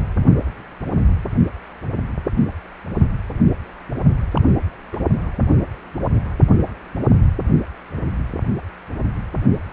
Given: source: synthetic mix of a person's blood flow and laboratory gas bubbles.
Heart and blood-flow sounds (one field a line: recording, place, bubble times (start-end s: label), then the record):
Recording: Doppler ultrasound of blood flow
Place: precordium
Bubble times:
4.35-4.42 s: bubbles
4.92-4.98 s: bubbles
From the record:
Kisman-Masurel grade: 112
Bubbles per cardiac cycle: 1 to 2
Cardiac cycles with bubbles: 1 to 10%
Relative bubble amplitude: moderate (0.250 to 0.450)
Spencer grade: 1 (occasional bubble signal discernible with the cardiac motion signal, with majority of cardiac periods free of bubbles)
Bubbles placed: only in the low amplitude regions of the cardiac cycle